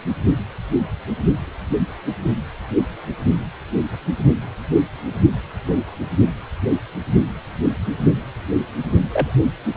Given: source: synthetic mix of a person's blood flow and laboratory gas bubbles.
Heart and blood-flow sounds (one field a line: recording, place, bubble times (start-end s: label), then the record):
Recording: Doppler ultrasound of blood flow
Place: precordium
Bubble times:
9.10-9.34 s: bubbles
9.73-9.77 s: bubbles
From the record:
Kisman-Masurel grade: 213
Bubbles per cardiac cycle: several, 3 to 8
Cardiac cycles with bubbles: 1 to 10%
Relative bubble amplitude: loud (0.450 to 0.775)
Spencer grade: 1 (occasional bubble signal discernible with the cardiac motion signal, with majority of cardiac periods free of bubbles)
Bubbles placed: only in the low amplitude regions of the cardiac cycle